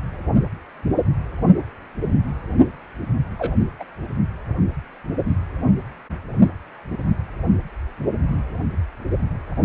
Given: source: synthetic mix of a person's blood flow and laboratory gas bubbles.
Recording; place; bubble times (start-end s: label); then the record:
Doppler ultrasound of blood flow; precordium
3.39-3.53 s: bubbles
3.79-3.84 s: bubbles
From the record:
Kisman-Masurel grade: 122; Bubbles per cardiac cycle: 1 to 2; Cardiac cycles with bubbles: 10 to 50%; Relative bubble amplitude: moderate (0.250 to 0.450); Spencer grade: 2 (many but less than half of the cardiac periods contain bubble signals, singularly or in groups); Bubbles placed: only in the low amplitude regions of the cardiac cycle